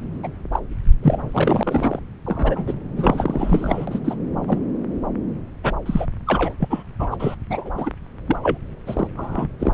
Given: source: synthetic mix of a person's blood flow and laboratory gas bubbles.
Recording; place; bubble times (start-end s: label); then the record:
Doppler ultrasound of blood flow; subclavian vein
0.23-0.28 s: bubbles
0.53-0.59 s: bubbles
1.02-1.99 s: bubbles
2.25-2.74 s: bubbles
2.96-3.98 s: bubbles
4.04-4.15 s: bubbles
4.48-4.59 s: bubbles
5.64-5.72 s: bubbles
5.86-6.06 s: bubbles
6.27-6.54 s: bubbles
6.60-6.84 s: bubbles
6.99-7.08 s: bubbles
7.11-7.17 s: bubbles
7.19-7.35 s: bubbles
7.50-7.71 s: bubbles
7.78-7.91 s: bubbles
8.27-8.37 s: bubbles
8.43-8.58 s: bubbles
8.87-9.08 s: bubbles
9.16-9.47 s: bubbles
9.59-9.72 s: bubbles
From the record:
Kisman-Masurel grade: 242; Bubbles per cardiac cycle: several, 3 to 8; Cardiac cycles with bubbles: 100%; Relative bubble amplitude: moderate (0.250 to 0.450); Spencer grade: 3 (all of the cardiac periods contain showers or single bubble signals, but not dominating or overriding the cardiac motion signals); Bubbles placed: anywhere in the cardiac cycle